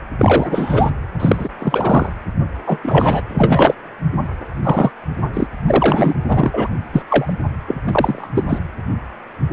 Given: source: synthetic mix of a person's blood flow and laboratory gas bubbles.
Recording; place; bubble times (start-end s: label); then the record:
Doppler ultrasound of blood flow; precordium
0.18-0.91 s: bubbles
1.20-1.49 s: bubbles
1.58-2.09 s: bubbles
2.66-2.79 s: bubbles
2.83-3.22 s: bubbles
3.28-3.74 s: bubbles
4.62-4.91 s: bubbles
5.33-5.47 s: bubbles
5.67-6.16 s: bubbles
6.28-6.50 s: bubbles
6.53-6.69 s: bubbles
6.92-7.03 s: bubbles
7.08-7.33 s: bubbles
7.67-7.81 s: bubbles
7.87-8.28 s: bubbles
8.35-8.45 s: bubbles
8.47-8.59 s: bubbles
From the record:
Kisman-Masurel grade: 233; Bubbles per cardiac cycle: several, 3 to 8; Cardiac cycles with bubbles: 50 to 99%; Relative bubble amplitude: loud (0.450 to 0.775); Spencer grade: 3 (all of the cardiac periods contain showers or single bubble signals, but not dominating or overriding the cardiac motion signals); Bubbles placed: anywhere in the cardiac cycle